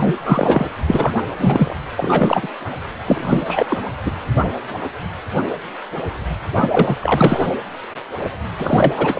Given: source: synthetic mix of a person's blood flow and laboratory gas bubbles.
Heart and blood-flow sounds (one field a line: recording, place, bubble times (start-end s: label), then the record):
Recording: Doppler ultrasound of blood flow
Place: precordium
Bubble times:
0.00-0.67 s: bubbles
0.87-1.22 s: bubbles
1.39-1.76 s: bubbles
1.97-2.47 s: bubbles
3.07-3.83 s: bubbles
4.05-4.12 s: bubbles
6.54-6.96 s: bubbles
7.00-7.46 s: bubbles
8.58-8.94 s: bubbles
8.96-9.20 s: bubbles
From the record:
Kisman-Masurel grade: 333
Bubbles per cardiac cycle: rolling drumbeat, 9 or more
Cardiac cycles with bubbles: 50 to 99%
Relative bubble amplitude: loud (0.450 to 0.775)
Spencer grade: 3 (all of the cardiac periods contain showers or single bubble signals, but not dominating or overriding the cardiac motion signals)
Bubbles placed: anywhere in the cardiac cycle